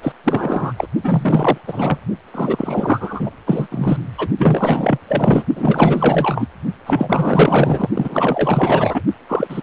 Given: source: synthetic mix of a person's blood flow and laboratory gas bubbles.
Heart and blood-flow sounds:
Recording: Doppler ultrasound of blood flow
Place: precordium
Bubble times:
0.02-0.12 s: bubbles
0.24-0.73 s: bubbles
0.77-0.87 s: bubbles
1.04-1.58 s: bubbles
1.67-1.98 s: bubbles
2.34-3.29 s: bubbles
3.46-3.67 s: bubbles
3.71-3.98 s: bubbles
4.17-4.29 s: bubbles
4.38-4.98 s: bubbles
5.08-5.43 s: bubbles
5.55-6.47 s: bubbles
6.86-7.89 s: bubbles
7.93-9.02 s: bubbles
9.29-9.63 s: bubbles
From the record:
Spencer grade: 4 (maximum detectable bubble signal sounding continuously throughout systole and diastole of every cardiac period, and overriding the amplitude of the normal cardiac signals)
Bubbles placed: only in the low amplitude regions of the cardiac cycle

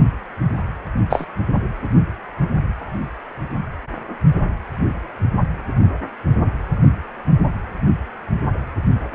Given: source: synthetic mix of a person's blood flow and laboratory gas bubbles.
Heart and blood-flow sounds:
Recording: Doppler ultrasound of blood flow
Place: precordium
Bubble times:
1.10-1.25 s: bubbles
From the record:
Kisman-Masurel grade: 113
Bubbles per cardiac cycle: 1 to 2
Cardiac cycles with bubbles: 1 to 10%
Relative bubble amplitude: loud (0.450 to 0.775)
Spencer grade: 1 (occasional bubble signal discernible with the cardiac motion signal, with majority of cardiac periods free of bubbles)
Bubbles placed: anywhere in the cardiac cycle

